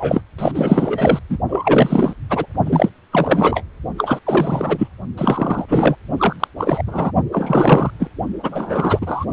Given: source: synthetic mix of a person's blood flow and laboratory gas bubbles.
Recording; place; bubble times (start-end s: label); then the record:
Doppler ultrasound of blood flow; precordium
0.00-0.21 s: bubbles
0.38-0.51 s: bubbles
0.54-1.19 s: bubbles
1.29-1.38 s: bubbles
1.48-2.13 s: bubbles
2.30-2.46 s: bubbles
2.65-2.89 s: bubbles
3.11-3.64 s: bubbles
3.98-4.19 s: bubbles
4.25-4.88 s: bubbles
5.17-5.65 s: bubbles
5.68-5.96 s: bubbles
6.17-6.36 s: bubbles
6.40-6.47 s: bubbles
6.57-6.82 s: bubbles
6.86-7.11 s: bubbles
7.32-7.90 s: bubbles
7.99-8.10 s: bubbles
8.42-9.25 s: bubbles
From the record:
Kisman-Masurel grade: 343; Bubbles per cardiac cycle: rolling drumbeat, 9 or more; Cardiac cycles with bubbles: 100%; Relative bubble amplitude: loud (0.450 to 0.775); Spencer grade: 3 (all of the cardiac periods contain showers or single bubble signals, but not dominating or overriding the cardiac motion signals); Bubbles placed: only in the low amplitude regions of the cardiac cycle